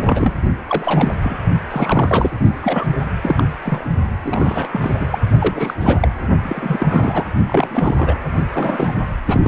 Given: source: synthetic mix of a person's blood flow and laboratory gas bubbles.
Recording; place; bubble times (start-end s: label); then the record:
Doppler ultrasound of blood flow; precordium
0.02-0.35 s: bubbles
0.68-1.14 s: bubbles
1.22-1.37 s: bubbles
1.71-2.31 s: bubbles
2.60-2.87 s: bubbles
3.21-3.45 s: bubbles
3.62-3.87 s: bubbles
4.23-4.68 s: bubbles
4.72-4.95 s: bubbles
5.00-5.08 s: bubbles
5.10-5.18 s: bubbles
5.40-5.75 s: bubbles
5.80-6.08 s: bubbles
6.42-7.27 s: bubbles
7.46-8.24 s: bubbles
8.53-8.95 s: bubbles
9.27-9.41 s: bubbles
9.44-9.48 s: bubbles
From the record:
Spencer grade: 3 (all of the cardiac periods contain showers or single bubble signals, but not dominating or overriding the cardiac motion signals); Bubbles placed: only in the low amplitude regions of the cardiac cycle